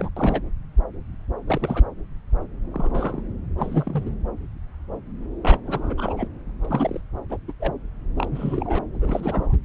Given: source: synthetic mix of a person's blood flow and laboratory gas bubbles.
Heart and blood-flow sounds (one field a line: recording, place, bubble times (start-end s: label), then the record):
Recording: Doppler ultrasound of blood flow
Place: subclavian vein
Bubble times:
0.00-0.10 s: bubbles
0.16-0.42 s: bubbles
1.47-1.83 s: bubbles
2.71-3.21 s: bubbles
3.58-4.03 s: bubbles
4.05-4.10 s: bubbles
5.43-5.57 s: bubbles
5.66-5.95 s: bubbles
5.97-6.28 s: bubbles
6.64-7.01 s: bubbles
7.29-7.38 s: bubbles
7.48-7.53 s: bubbles
7.60-7.72 s: bubbles
8.16-8.82 s: bubbles
8.95-9.54 s: bubbles
From the record:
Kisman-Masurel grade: 232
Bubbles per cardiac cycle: several, 3 to 8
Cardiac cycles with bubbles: 50 to 99%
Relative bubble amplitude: moderate (0.250 to 0.450)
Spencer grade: 3 (all of the cardiac periods contain showers or single bubble signals, but not dominating or overriding the cardiac motion signals)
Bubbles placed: anywhere in the cardiac cycle